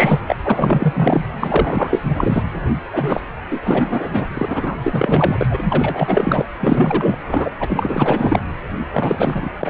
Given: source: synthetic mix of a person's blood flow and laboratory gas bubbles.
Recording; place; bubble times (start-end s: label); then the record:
Doppler ultrasound of blood flow; precordium
0.00-0.21 s: bubbles
0.28-0.35 s: bubbles
0.43-1.25 s: bubbles
1.40-2.01 s: bubbles
2.04-2.44 s: bubbles
2.92-3.21 s: bubbles
3.50-4.30 s: bubbles
4.37-4.76 s: bubbles
4.83-6.45 s: bubbles
6.58-7.18 s: bubbles
7.26-7.50 s: bubbles
7.59-8.41 s: bubbles
8.94-9.51 s: bubbles
9.60-9.69 s: bubbles
From the record:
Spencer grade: 4 (maximum detectable bubble signal sounding continuously throughout systole and diastole of every cardiac period, and overriding the amplitude of the normal cardiac signals); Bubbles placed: anywhere in the cardiac cycle